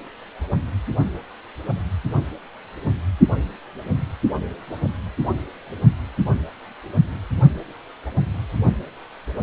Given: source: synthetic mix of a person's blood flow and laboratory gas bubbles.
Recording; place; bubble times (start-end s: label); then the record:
Doppler ultrasound of blood flow; precordium
no bubbles
From the record:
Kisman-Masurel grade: 000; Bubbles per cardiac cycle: 0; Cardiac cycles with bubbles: 0%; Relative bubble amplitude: no bubbles discernible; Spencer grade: 0 (complete lack of bubble signals)